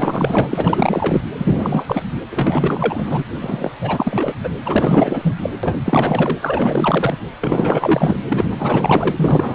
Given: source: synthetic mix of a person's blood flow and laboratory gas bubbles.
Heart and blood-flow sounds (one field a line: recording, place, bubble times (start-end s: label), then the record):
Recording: Doppler ultrasound of blood flow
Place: precordium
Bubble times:
0.00-0.47 s: bubbles
0.51-1.21 s: bubbles
1.38-2.02 s: bubbles
2.31-3.24 s: bubbles
3.41-3.72 s: bubbles
3.81-4.34 s: bubbles
4.43-4.49 s: bubbles
4.66-5.35 s: bubbles
5.42-5.50 s: bubbles
5.63-5.75 s: bubbles
5.85-6.39 s: bubbles
6.42-7.17 s: bubbles
7.41-8.18 s: bubbles
8.27-8.51 s: bubbles
8.58-9.11 s: bubbles
9.17-9.55 s: bubbles
From the record:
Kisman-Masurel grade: 444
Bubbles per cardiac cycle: continuous sound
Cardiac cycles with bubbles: 100%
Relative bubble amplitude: maximal (0.775 to 0.999)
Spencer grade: 4 (maximum detectable bubble signal sounding continuously throughout systole and diastole of every cardiac period, and overriding the amplitude of the normal cardiac signals)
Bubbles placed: anywhere in the cardiac cycle